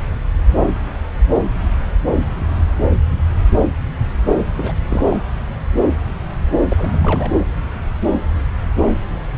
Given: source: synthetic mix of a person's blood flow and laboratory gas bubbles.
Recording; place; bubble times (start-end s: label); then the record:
Doppler ultrasound of blood flow; subclavian vein
4.54-4.74 s: bubbles
4.86-5.18 s: bubbles
6.69-7.00 s: bubbles
7.02-7.32 s: bubbles
From the record:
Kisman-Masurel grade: 221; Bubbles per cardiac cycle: several, 3 to 8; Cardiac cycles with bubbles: 10 to 50%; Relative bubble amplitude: barely perceptible (0.100 to 0.250); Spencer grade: 2 (many but less than half of the cardiac periods contain bubble signals, singularly or in groups); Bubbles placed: anywhere in the cardiac cycle